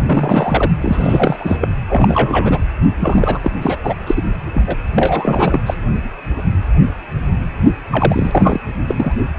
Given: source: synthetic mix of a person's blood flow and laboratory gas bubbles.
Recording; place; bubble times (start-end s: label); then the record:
Doppler ultrasound of blood flow; precordium
0.07-0.70 s: bubbles
0.81-1.56 s: bubbles
1.60-1.68 s: bubbles
1.89-2.59 s: bubbles
3.00-3.39 s: bubbles
3.42-3.51 s: bubbles
3.62-3.77 s: bubbles
3.83-3.95 s: bubbles
4.06-4.22 s: bubbles
4.54-4.62 s: bubbles
4.67-4.76 s: bubbles
4.95-5.59 s: bubbles
5.66-5.74 s: bubbles
7.91-8.60 s: bubbles
8.88-9.15 s: bubbles
From the record:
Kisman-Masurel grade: 333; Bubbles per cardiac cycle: rolling drumbeat, 9 or more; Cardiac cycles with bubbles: 50 to 99%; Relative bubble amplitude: loud (0.450 to 0.775); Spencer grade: 3 (all of the cardiac periods contain showers or single bubble signals, but not dominating or overriding the cardiac motion signals); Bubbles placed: anywhere in the cardiac cycle